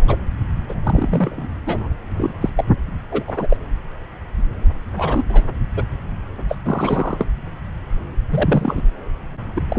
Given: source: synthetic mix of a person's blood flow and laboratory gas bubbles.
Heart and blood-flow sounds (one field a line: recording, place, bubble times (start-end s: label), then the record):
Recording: Doppler ultrasound of blood flow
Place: subclavian vein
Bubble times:
0.00-0.16 s: bubbles
0.69-0.74 s: bubbles
0.83-1.47 s: bubbles
1.66-1.88 s: bubbles
2.17-2.33 s: bubbles
2.42-2.50 s: bubbles
2.56-2.64 s: bubbles
3.11-3.23 s: bubbles
3.27-3.56 s: bubbles
4.96-5.23 s: bubbles
5.29-5.42 s: bubbles
5.76-5.83 s: bubbles
6.49-6.56 s: bubbles
6.65-7.26 s: bubbles
8.29-8.82 s: bubbles
9.55-9.62 s: bubbles
9.69-9.78 s: bubbles
From the record:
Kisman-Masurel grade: 232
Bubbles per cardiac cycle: several, 3 to 8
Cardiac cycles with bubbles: 50 to 99%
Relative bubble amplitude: moderate (0.250 to 0.450)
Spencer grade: 3 (all of the cardiac periods contain showers or single bubble signals, but not dominating or overriding the cardiac motion signals)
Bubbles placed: anywhere in the cardiac cycle